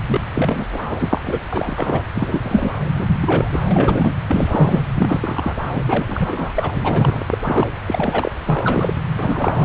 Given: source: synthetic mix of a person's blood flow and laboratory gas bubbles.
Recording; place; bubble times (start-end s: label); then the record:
Doppler ultrasound of blood flow; subclavian vein
0.06-0.21 s: bubbles
0.35-0.67 s: bubbles
0.72-0.84 s: bubbles
0.89-1.21 s: bubbles
1.24-1.41 s: bubbles
1.50-2.02 s: bubbles
2.15-2.74 s: bubbles
2.95-3.17 s: bubbles
3.21-3.60 s: bubbles
3.71-4.12 s: bubbles
4.28-4.84 s: bubbles
4.96-5.54 s: bubbles
5.71-7.24 s: bubbles
7.29-7.38 s: bubbles
7.44-7.67 s: bubbles
7.86-8.32 s: bubbles
8.44-8.94 s: bubbles
9.17-9.54 s: bubbles
9.57-9.65 s: bubbles
From the record:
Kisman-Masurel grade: 333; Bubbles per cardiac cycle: rolling drumbeat, 9 or more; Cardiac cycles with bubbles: 50 to 99%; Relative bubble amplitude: loud (0.450 to 0.775); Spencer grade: 3 (all of the cardiac periods contain showers or single bubble signals, but not dominating or overriding the cardiac motion signals); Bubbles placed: anywhere in the cardiac cycle